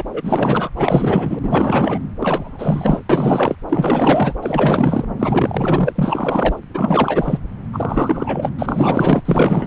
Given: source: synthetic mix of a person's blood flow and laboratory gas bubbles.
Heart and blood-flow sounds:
Doppler ultrasound of blood flow; subclavian vein
0.00-0.03 s: bubbles
0.13-0.69 s: bubbles
0.76-1.39 s: bubbles
1.43-1.98 s: bubbles
2.19-3.02 s: bubbles
3.09-3.56 s: bubbles
3.69-4.33 s: bubbles
4.43-5.05 s: bubbles
5.19-6.59 s: bubbles
6.74-7.38 s: bubbles
7.73-8.51 s: bubbles
8.58-9.22 s: bubbles
9.24-9.67 s: bubbles
From the record:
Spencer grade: 4 (maximum detectable bubble signal sounding continuously throughout systole and diastole of every cardiac period, and overriding the amplitude of the normal cardiac signals); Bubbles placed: anywhere in the cardiac cycle

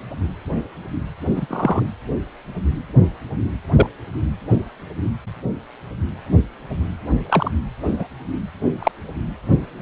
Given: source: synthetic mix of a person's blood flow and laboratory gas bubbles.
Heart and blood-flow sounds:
Doppler ultrasound of blood flow; precordium
1.36-1.46 s: bubbles
1.50-1.83 s: bubbles
3.74-3.87 s: bubbles
7.29-7.51 s: bubbles
7.99-8.07 s: bubbles
8.79-8.91 s: bubbles
From the record:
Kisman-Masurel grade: 123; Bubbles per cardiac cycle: 1 to 2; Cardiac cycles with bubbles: 10 to 50%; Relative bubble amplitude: loud (0.450 to 0.775); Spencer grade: 2 (many but less than half of the cardiac periods contain bubble signals, singularly or in groups); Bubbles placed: anywhere in the cardiac cycle

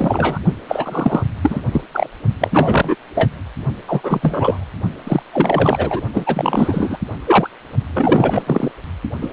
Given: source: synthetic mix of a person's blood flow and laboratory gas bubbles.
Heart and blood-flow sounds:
Doppler ultrasound of blood flow; precordium
0.00-0.39 s: bubbles
0.68-1.24 s: bubbles
1.42-1.60 s: bubbles
1.72-1.81 s: bubbles
1.93-2.08 s: bubbles
2.41-2.95 s: bubbles
3.15-3.30 s: bubbles
3.88-4.00 s: bubbles
4.04-4.65 s: bubbles
5.04-5.23 s: bubbles
5.33-6.02 s: bubbles
6.13-6.97 s: bubbles
7.25-7.50 s: bubbles
7.94-8.71 s: bubbles
9.21-9.32 s: bubbles
From the record:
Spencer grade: 3 (all of the cardiac periods contain showers or single bubble signals, but not dominating or overriding the cardiac motion signals); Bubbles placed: only in the low amplitude regions of the cardiac cycle

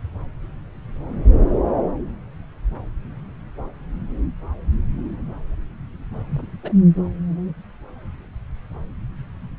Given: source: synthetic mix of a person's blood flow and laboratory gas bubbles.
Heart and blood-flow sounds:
Doppler ultrasound of blood flow; subclavian vein
6.31-6.47 s: bubbles
6.63-6.72 s: bubbles
From the record:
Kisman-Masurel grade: 211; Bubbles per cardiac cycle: several, 3 to 8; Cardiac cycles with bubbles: 1 to 10%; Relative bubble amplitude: barely perceptible (0.100 to 0.250); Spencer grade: 1 (occasional bubble signal discernible with the cardiac motion signal, with majority of cardiac periods free of bubbles); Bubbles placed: anywhere in the cardiac cycle

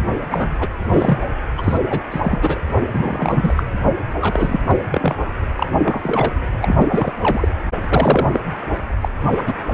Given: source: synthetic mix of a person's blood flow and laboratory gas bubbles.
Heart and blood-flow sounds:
Doppler ultrasound of blood flow; precordium
0.00-0.03 s: bubbles
0.29-0.56 s: bubbles
0.60-0.68 s: bubbles
0.90-1.25 s: bubbles
1.57-1.77 s: bubbles
1.90-2.02 s: bubbles
2.10-2.61 s: bubbles
2.93-3.53 s: bubbles
3.56-3.63 s: bubbles
4.21-4.59 s: bubbles
4.67-4.76 s: bubbles
4.91-5.15 s: bubbles
5.56-5.67 s: bubbles
5.79-6.32 s: bubbles
6.62-7.13 s: bubbles
7.21-7.48 s: bubbles
7.83-8.40 s: bubbles
9.01-9.09 s: bubbles
9.21-9.42 s: bubbles
9.46-9.54 s: bubbles
9.72-9.74 s: bubbles
From the record:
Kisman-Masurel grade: 343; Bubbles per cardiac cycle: rolling drumbeat, 9 or more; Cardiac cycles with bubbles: 100%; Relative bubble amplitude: loud (0.450 to 0.775); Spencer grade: 3 (all of the cardiac periods contain showers or single bubble signals, but not dominating or overriding the cardiac motion signals); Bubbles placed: anywhere in the cardiac cycle

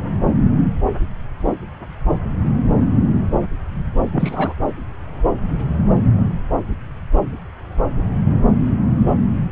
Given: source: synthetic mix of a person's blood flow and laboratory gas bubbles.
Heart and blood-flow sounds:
Doppler ultrasound of blood flow; subclavian vein
4.12-4.54 s: bubbles
From the record:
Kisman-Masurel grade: 213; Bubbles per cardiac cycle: several, 3 to 8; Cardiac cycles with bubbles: 1 to 10%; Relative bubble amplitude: loud (0.450 to 0.775); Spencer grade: 1 (occasional bubble signal discernible with the cardiac motion signal, with majority of cardiac periods free of bubbles); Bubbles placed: anywhere in the cardiac cycle

